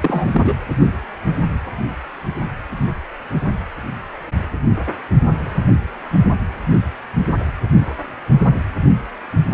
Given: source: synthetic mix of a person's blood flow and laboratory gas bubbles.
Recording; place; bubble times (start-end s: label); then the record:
Doppler ultrasound of blood flow; precordium
0.00-0.58 s: bubbles
From the record:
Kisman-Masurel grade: 213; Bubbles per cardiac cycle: several, 3 to 8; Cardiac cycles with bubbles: 1 to 10%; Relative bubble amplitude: loud (0.450 to 0.775); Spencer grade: 1 (occasional bubble signal discernible with the cardiac motion signal, with majority of cardiac periods free of bubbles); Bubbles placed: anywhere in the cardiac cycle